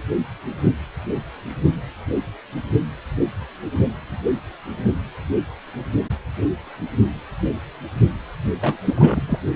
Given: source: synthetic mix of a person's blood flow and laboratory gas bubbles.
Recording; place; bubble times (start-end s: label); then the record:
Doppler ultrasound of blood flow; precordium
8.61-8.77 s: bubbles
8.85-9.39 s: bubbles
From the record:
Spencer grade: 1 (occasional bubble signal discernible with the cardiac motion signal, with majority of cardiac periods free of bubbles); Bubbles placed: only in the low amplitude regions of the cardiac cycle